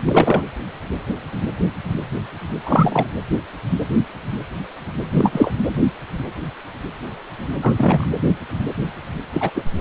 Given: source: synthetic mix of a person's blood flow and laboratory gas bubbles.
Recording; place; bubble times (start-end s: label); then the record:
Doppler ultrasound of blood flow; precordium
0.06-0.46 s: bubbles
2.65-3.06 s: bubbles
5.12-5.51 s: bubbles
7.62-8.06 s: bubbles
9.32-9.51 s: bubbles
9.54-9.62 s: bubbles
From the record:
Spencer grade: 2 (many but less than half of the cardiac periods contain bubble signals, singularly or in groups); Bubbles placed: anywhere in the cardiac cycle